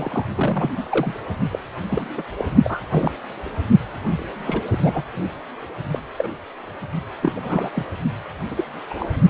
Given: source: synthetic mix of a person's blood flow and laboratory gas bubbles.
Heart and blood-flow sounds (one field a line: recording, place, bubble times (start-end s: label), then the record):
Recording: Doppler ultrasound of blood flow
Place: precordium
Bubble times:
0.00-0.25 s: bubbles
0.35-0.71 s: bubbles
0.77-0.83 s: bubbles
0.91-1.13 s: bubbles
1.50-1.59 s: bubbles
1.90-2.07 s: bubbles
2.17-2.23 s: bubbles
2.37-2.45 s: bubbles
2.64-2.80 s: bubbles
2.91-3.12 s: bubbles
4.06-4.25 s: bubbles
4.46-4.63 s: bubbles
4.71-4.78 s: bubbles
4.82-5.02 s: bubbles
5.91-6.00 s: bubbles
6.17-6.29 s: bubbles
7.22-7.32 s: bubbles
7.35-7.70 s: bubbles
7.74-7.85 s: bubbles
8.50-8.64 s: bubbles
8.90-9.07 s: bubbles
From the record:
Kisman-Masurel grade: 242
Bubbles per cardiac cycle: several, 3 to 8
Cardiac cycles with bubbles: 100%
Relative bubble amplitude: moderate (0.250 to 0.450)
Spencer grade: 3 (all of the cardiac periods contain showers or single bubble signals, but not dominating or overriding the cardiac motion signals)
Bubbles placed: only in the low amplitude regions of the cardiac cycle